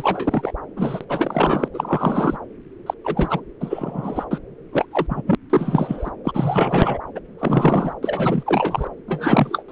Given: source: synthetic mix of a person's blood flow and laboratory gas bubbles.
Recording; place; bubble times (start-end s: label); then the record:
Doppler ultrasound of blood flow; subclavian vein
0.00-0.53 s: bubbles
0.76-1.04 s: bubbles
1.09-1.68 s: bubbles
1.73-2.37 s: bubbles
2.86-2.94 s: bubbles
3.04-3.41 s: bubbles
3.60-4.25 s: bubbles
4.31-4.39 s: bubbles
4.73-4.86 s: bubbles
4.91-5.22 s: bubbles
5.27-5.35 s: bubbles
5.50-6.11 s: bubbles
6.24-6.99 s: bubbles
7.15-7.20 s: bubbles
7.38-7.93 s: bubbles
8.02-8.89 s: bubbles
9.07-9.63 s: bubbles
9.68-9.72 s: bubbles
From the record:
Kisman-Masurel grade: 343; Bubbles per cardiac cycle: rolling drumbeat, 9 or more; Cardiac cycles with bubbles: 100%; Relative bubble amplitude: loud (0.450 to 0.775); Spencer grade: 3 (all of the cardiac periods contain showers or single bubble signals, but not dominating or overriding the cardiac motion signals); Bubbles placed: anywhere in the cardiac cycle